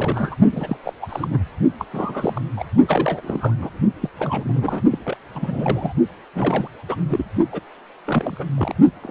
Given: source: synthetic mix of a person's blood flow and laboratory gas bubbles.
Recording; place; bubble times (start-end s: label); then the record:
Doppler ultrasound of blood flow; precordium
0.00-0.36 s: bubbles
0.52-0.77 s: bubbles
0.84-0.93 s: bubbles
1.02-1.06 s: bubbles
1.09-1.44 s: bubbles
1.79-1.85 s: bubbles
1.92-2.42 s: bubbles
2.56-2.65 s: bubbles
2.88-3.80 s: bubbles
4.01-4.09 s: bubbles
4.18-4.82 s: bubbles
4.90-4.98 s: bubbles
5.04-5.17 s: bubbles
5.34-5.93 s: bubbles
6.33-6.68 s: bubbles
6.88-6.96 s: bubbles
7.08-7.25 s: bubbles
7.51-7.60 s: bubbles
8.04-8.46 s: bubbles
8.57-8.74 s: bubbles
9.03-9.11 s: bubbles
From the record:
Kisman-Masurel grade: 342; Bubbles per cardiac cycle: rolling drumbeat, 9 or more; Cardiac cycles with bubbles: 100%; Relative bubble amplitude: moderate (0.250 to 0.450); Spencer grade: 3 (all of the cardiac periods contain showers or single bubble signals, but not dominating or overriding the cardiac motion signals); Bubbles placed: only in the low amplitude regions of the cardiac cycle